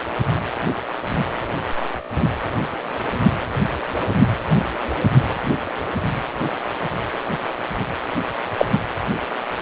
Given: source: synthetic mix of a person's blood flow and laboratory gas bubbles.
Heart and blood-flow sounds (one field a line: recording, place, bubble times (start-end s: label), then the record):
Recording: Doppler ultrasound of blood flow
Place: precordium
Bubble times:
8.58-8.65 s: bubbles
From the record:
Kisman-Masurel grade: 213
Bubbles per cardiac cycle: several, 3 to 8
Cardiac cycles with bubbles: 1 to 10%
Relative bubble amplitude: loud (0.450 to 0.775)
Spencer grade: 1 (occasional bubble signal discernible with the cardiac motion signal, with majority of cardiac periods free of bubbles)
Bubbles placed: anywhere in the cardiac cycle